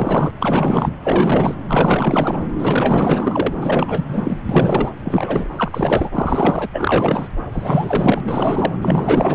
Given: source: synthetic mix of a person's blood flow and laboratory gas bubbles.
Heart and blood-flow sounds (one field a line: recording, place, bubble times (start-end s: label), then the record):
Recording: Doppler ultrasound of blood flow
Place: subclavian vein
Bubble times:
0.00-0.33 s: bubbles
0.40-0.94 s: bubbles
1.02-1.54 s: bubbles
1.68-2.40 s: bubbles
2.58-3.52 s: bubbles
3.56-4.04 s: bubbles
4.08-4.38 s: bubbles
4.49-4.91 s: bubbles
5.04-5.49 s: bubbles
5.56-6.10 s: bubbles
6.13-6.70 s: bubbles
6.73-7.28 s: bubbles
7.52-8.20 s: bubbles
8.23-8.77 s: bubbles
8.81-9.35 s: bubbles
From the record:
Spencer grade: 4 (maximum detectable bubble signal sounding continuously throughout systole and diastole of every cardiac period, and overriding the amplitude of the normal cardiac signals)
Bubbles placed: anywhere in the cardiac cycle